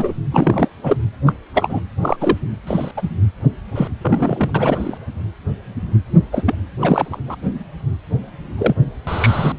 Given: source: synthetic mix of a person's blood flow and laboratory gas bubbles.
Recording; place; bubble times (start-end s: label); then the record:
Doppler ultrasound of blood flow; precordium
0.00-0.13 s: bubbles
0.31-0.68 s: bubbles
0.83-0.96 s: bubbles
1.26-1.33 s: bubbles
1.54-1.81 s: bubbles
2.02-2.17 s: bubbles
2.20-2.38 s: bubbles
2.67-2.92 s: bubbles
2.97-3.10 s: bubbles
3.75-3.88 s: bubbles
4.01-4.97 s: bubbles
6.32-6.43 s: bubbles
6.46-6.54 s: bubbles
6.81-7.20 s: bubbles
7.27-7.36 s: bubbles
8.58-8.74 s: bubbles
9.07-9.52 s: bubbles
From the record:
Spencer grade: 3 (all of the cardiac periods contain showers or single bubble signals, but not dominating or overriding the cardiac motion signals); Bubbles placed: anywhere in the cardiac cycle